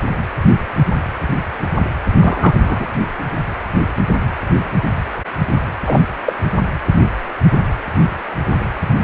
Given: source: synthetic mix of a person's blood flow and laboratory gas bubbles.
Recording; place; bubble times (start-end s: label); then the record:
Doppler ultrasound of blood flow; precordium
2.19-2.54 s: bubbles
2.59-2.86 s: bubbles
5.87-6.07 s: bubbles
6.26-6.33 s: bubbles
From the record:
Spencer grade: 2 (many but less than half of the cardiac periods contain bubble signals, singularly or in groups); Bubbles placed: anywhere in the cardiac cycle